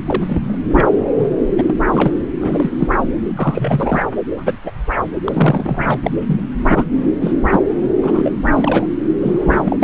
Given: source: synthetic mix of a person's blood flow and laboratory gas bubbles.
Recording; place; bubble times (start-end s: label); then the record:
Doppler ultrasound of blood flow; subclavian vein
0.07-0.58 s: bubbles
0.70-0.89 s: bubbles
1.19-1.36 s: bubbles
1.57-1.74 s: bubbles
1.85-2.16 s: bubbles
2.40-2.71 s: bubbles
2.79-2.88 s: bubbles
3.36-4.06 s: bubbles
4.37-4.57 s: bubbles
4.64-4.71 s: bubbles
5.25-5.98 s: bubbles
6.03-6.10 s: bubbles
6.26-6.41 s: bubbles
6.64-6.85 s: bubbles
7.21-7.32 s: bubbles
7.50-7.60 s: bubbles
8.01-8.31 s: bubbles
8.54-8.87 s: bubbles
9.21-9.77 s: bubbles
9.79-9.84 s: bubbles
From the record:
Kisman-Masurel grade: 242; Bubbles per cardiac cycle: several, 3 to 8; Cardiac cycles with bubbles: 100%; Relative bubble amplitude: moderate (0.250 to 0.450); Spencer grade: 3 (all of the cardiac periods contain showers or single bubble signals, but not dominating or overriding the cardiac motion signals); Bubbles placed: anywhere in the cardiac cycle